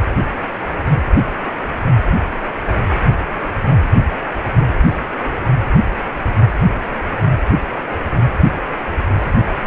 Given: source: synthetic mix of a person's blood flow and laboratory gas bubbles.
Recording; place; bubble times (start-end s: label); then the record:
Doppler ultrasound of blood flow; precordium
no bubbles
From the record:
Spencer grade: 0 (complete lack of bubble signals)